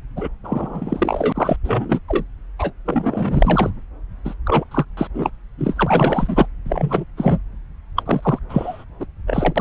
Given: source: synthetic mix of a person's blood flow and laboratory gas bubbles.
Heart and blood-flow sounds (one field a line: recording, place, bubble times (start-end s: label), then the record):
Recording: Doppler ultrasound of blood flow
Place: subclavian vein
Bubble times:
0.16-0.29 s: bubbles
0.44-1.32 s: bubbles
1.35-1.56 s: bubbles
1.64-2.00 s: bubbles
2.08-2.24 s: bubbles
2.58-2.71 s: bubbles
2.85-3.71 s: bubbles
4.25-4.34 s: bubbles
4.45-4.65 s: bubbles
4.71-4.85 s: bubbles
4.97-5.08 s: bubbles
5.14-5.31 s: bubbles
5.58-6.46 s: bubbles
6.66-7.05 s: bubbles
7.17-7.38 s: bubbles
7.96-8.03 s: bubbles
8.05-8.39 s: bubbles
8.49-8.85 s: bubbles
9.00-9.06 s: bubbles
9.27-9.61 s: bubbles
From the record:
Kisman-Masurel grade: 343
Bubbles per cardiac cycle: rolling drumbeat, 9 or more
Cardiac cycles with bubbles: 100%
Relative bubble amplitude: loud (0.450 to 0.775)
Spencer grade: 3 (all of the cardiac periods contain showers or single bubble signals, but not dominating or overriding the cardiac motion signals)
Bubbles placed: anywhere in the cardiac cycle